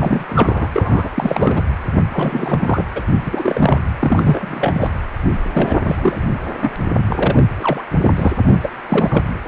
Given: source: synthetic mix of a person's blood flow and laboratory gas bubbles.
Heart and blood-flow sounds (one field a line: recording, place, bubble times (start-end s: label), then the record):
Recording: Doppler ultrasound of blood flow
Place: precordium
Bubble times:
0.00-0.24 s: bubbles
0.28-0.70 s: bubbles
0.74-1.09 s: bubbles
1.15-1.62 s: bubbles
2.12-2.85 s: bubbles
2.95-3.02 s: bubbles
3.20-3.78 s: bubbles
3.99-4.88 s: bubbles
5.54-5.77 s: bubbles
5.85-6.28 s: bubbles
6.61-6.70 s: bubbles
7.09-7.45 s: bubbles
7.59-7.84 s: bubbles
8.03-8.12 s: bubbles
8.16-8.32 s: bubbles
8.47-8.55 s: bubbles
8.63-8.68 s: bubbles
8.88-9.25 s: bubbles
From the record:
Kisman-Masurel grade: 343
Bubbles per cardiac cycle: rolling drumbeat, 9 or more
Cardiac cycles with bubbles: 100%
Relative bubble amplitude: loud (0.450 to 0.775)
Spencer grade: 3 (all of the cardiac periods contain showers or single bubble signals, but not dominating or overriding the cardiac motion signals)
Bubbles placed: anywhere in the cardiac cycle